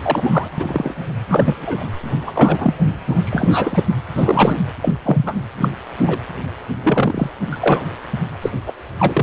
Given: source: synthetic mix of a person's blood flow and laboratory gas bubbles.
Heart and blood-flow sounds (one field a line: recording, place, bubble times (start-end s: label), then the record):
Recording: Doppler ultrasound of blood flow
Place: precordium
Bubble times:
0.03-0.47 s: bubbles
0.57-0.94 s: bubbles
1.28-1.86 s: bubbles
2.26-2.74 s: bubbles
3.08-3.21 s: bubbles
3.24-3.83 s: bubbles
4.16-4.61 s: bubbles
4.82-4.95 s: bubbles
5.05-5.34 s: bubbles
5.58-5.70 s: bubbles
6.01-6.19 s: bubbles
6.83-7.30 s: bubbles
7.53-7.58 s: bubbles
7.62-7.84 s: bubbles
8.41-8.50 s: bubbles
8.66-8.73 s: bubbles
8.99-9.23 s: bubbles
From the record:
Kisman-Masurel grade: 242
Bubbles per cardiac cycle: several, 3 to 8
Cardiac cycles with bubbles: 100%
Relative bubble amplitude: moderate (0.250 to 0.450)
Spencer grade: 3 (all of the cardiac periods contain showers or single bubble signals, but not dominating or overriding the cardiac motion signals)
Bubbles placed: anywhere in the cardiac cycle